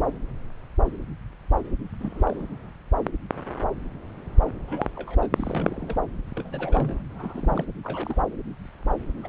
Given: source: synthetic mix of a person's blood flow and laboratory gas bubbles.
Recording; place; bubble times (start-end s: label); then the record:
Doppler ultrasound of blood flow; subclavian vein
2.00-2.44 s: bubbles
4.68-4.88 s: bubbles
4.96-5.28 s: bubbles
5.36-5.97 s: bubbles
6.36-7.03 s: bubbles
7.09-7.65 s: bubbles
7.83-8.21 s: bubbles
9.23-9.28 s: bubbles
From the record:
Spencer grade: 2 (many but less than half of the cardiac periods contain bubble signals, singularly or in groups); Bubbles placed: anywhere in the cardiac cycle